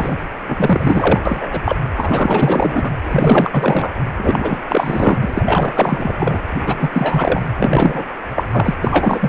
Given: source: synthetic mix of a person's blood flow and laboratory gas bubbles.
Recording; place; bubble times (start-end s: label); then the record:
Doppler ultrasound of blood flow; precordium
0.00-0.15 s: bubbles
0.48-1.22 s: bubbles
1.25-1.48 s: bubbles
1.51-1.61 s: bubbles
1.65-1.76 s: bubbles
1.96-2.91 s: bubbles
3.02-3.49 s: bubbles
3.52-3.93 s: bubbles
4.14-4.62 s: bubbles
4.67-6.14 s: bubbles
6.20-6.39 s: bubbles
6.50-6.90 s: bubbles
6.92-7.42 s: bubbles
7.56-8.06 s: bubbles
8.36-8.44 s: bubbles
8.51-8.75 s: bubbles
8.82-9.29 s: bubbles
From the record:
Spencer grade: 4 (maximum detectable bubble signal sounding continuously throughout systole and diastole of every cardiac period, and overriding the amplitude of the normal cardiac signals); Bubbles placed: anywhere in the cardiac cycle